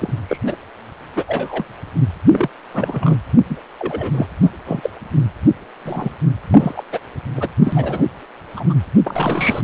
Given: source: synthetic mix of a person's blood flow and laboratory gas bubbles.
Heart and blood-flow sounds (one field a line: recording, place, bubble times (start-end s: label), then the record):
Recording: Doppler ultrasound of blood flow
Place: precordium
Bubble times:
0.00-0.13 s: bubbles
0.28-0.38 s: bubbles
0.44-0.56 s: bubbles
1.15-1.24 s: bubbles
1.27-1.65 s: bubbles
2.29-2.48 s: bubbles
2.72-3.18 s: bubbles
3.48-3.56 s: bubbles
3.78-4.26 s: bubbles
4.42-4.50 s: bubbles
4.66-4.90 s: bubbles
5.85-6.12 s: bubbles
6.50-6.73 s: bubbles
6.76-6.83 s: bubbles
6.92-6.99 s: bubbles
7.37-7.49 s: bubbles
7.64-8.07 s: bubbles
8.56-8.73 s: bubbles
9.04-9.64 s: bubbles
From the record:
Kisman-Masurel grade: 242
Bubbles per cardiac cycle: several, 3 to 8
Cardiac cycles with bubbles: 100%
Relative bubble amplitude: moderate (0.250 to 0.450)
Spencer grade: 3 (all of the cardiac periods contain showers or single bubble signals, but not dominating or overriding the cardiac motion signals)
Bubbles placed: anywhere in the cardiac cycle